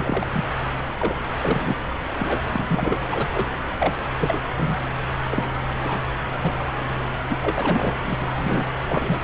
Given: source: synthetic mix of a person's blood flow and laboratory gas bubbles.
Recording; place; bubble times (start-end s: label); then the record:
Doppler ultrasound of blood flow; subclavian vein
0.00-0.27 s: bubbles
0.32-0.44 s: bubbles
0.98-1.17 s: bubbles
1.41-1.76 s: bubbles
2.18-2.42 s: bubbles
2.53-2.66 s: bubbles
2.68-3.00 s: bubbles
3.11-3.28 s: bubbles
3.34-3.45 s: bubbles
3.80-3.93 s: bubbles
4.18-4.39 s: bubbles
4.56-4.77 s: bubbles
5.31-5.46 s: bubbles
5.83-6.00 s: bubbles
6.42-6.54 s: bubbles
7.27-7.38 s: bubbles
7.42-7.96 s: bubbles
8.03-8.17 s: bubbles
8.20-8.27 s: bubbles
8.38-8.64 s: bubbles
8.88-9.21 s: bubbles
From the record:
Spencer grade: 3 (all of the cardiac periods contain showers or single bubble signals, but not dominating or overriding the cardiac motion signals); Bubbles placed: anywhere in the cardiac cycle